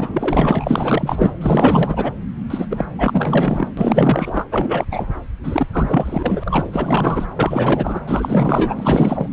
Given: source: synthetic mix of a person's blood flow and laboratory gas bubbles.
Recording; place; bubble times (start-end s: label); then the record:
Doppler ultrasound of blood flow; subclavian vein
0.00-1.33 s: bubbles
1.41-2.12 s: bubbles
2.50-2.66 s: bubbles
2.70-2.85 s: bubbles
2.98-3.69 s: bubbles
3.77-4.44 s: bubbles
4.51-4.85 s: bubbles
4.91-5.13 s: bubbles
5.43-5.67 s: bubbles
5.72-7.26 s: bubbles
7.36-8.01 s: bubbles
8.08-9.29 s: bubbles
From the record:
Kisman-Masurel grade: 444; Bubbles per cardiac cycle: continuous sound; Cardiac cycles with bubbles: 100%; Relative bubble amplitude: maximal (0.775 to 0.999); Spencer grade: 4 (maximum detectable bubble signal sounding continuously throughout systole and diastole of every cardiac period, and overriding the amplitude of the normal cardiac signals); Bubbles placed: anywhere in the cardiac cycle